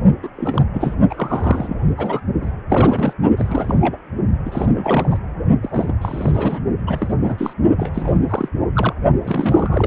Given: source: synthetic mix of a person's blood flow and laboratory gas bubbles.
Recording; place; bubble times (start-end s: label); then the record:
Doppler ultrasound of blood flow; precordium
0.22-0.29 s: bubbles
0.36-0.65 s: bubbles
0.74-0.94 s: bubbles
1.09-1.93 s: bubbles
1.97-2.20 s: bubbles
2.42-2.51 s: bubbles
2.69-3.14 s: bubbles
3.37-3.98 s: bubbles
4.45-5.18 s: bubbles
5.62-5.96 s: bubbles
6.01-6.61 s: bubbles
6.86-7.16 s: bubbles
7.21-7.54 s: bubbles
7.77-8.21 s: bubbles
8.24-8.48 s: bubbles
8.76-8.93 s: bubbles
9.21-9.87 s: bubbles
From the record:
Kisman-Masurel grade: 342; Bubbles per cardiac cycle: rolling drumbeat, 9 or more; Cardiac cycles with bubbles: 100%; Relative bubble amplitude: moderate (0.250 to 0.450); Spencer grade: 3 (all of the cardiac periods contain showers or single bubble signals, but not dominating or overriding the cardiac motion signals); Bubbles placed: only in the low amplitude regions of the cardiac cycle